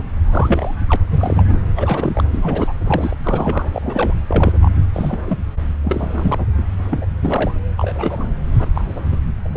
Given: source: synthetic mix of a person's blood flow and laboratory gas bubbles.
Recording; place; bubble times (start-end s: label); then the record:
Doppler ultrasound of blood flow; subclavian vein
0.00-0.02 s: bubbles
0.25-0.76 s: bubbles
0.89-0.96 s: bubbles
1.10-1.59 s: bubbles
1.75-2.21 s: bubbles
2.32-2.73 s: bubbles
2.77-3.17 s: bubbles
3.23-3.69 s: bubbles
3.72-4.13 s: bubbles
4.28-4.58 s: bubbles
4.62-4.71 s: bubbles
4.93-5.19 s: bubbles
5.26-5.42 s: bubbles
5.83-6.46 s: bubbles
6.58-6.62 s: bubbles
6.91-7.06 s: bubbles
7.22-7.52 s: bubbles
7.77-8.34 s: bubbles
8.54-8.70 s: bubbles
8.75-8.99 s: bubbles
9.12-9.17 s: bubbles
9.44-9.57 s: bubbles
From the record:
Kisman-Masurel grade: 242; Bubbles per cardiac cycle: several, 3 to 8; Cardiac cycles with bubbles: 100%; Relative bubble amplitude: moderate (0.250 to 0.450); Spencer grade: 3 (all of the cardiac periods contain showers or single bubble signals, but not dominating or overriding the cardiac motion signals); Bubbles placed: anywhere in the cardiac cycle